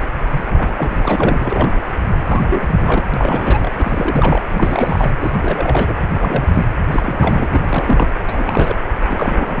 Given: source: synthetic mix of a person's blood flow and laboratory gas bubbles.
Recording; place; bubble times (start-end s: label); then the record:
Doppler ultrasound of blood flow; precordium
0.00-0.03 s: bubbles
0.30-1.82 s: bubbles
2.26-3.04 s: bubbles
3.14-3.72 s: bubbles
3.77-4.42 s: bubbles
4.51-5.10 s: bubbles
5.20-5.35 s: bubbles
5.41-5.94 s: bubbles
6.18-6.72 s: bubbles
6.90-7.49 s: bubbles
7.52-8.13 s: bubbles
8.26-8.79 s: bubbles
9.06-9.60 s: bubbles
From the record:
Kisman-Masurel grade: 342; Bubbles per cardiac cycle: rolling drumbeat, 9 or more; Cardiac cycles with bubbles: 100%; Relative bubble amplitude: moderate (0.250 to 0.450); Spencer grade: 3 (all of the cardiac periods contain showers or single bubble signals, but not dominating or overriding the cardiac motion signals); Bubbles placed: anywhere in the cardiac cycle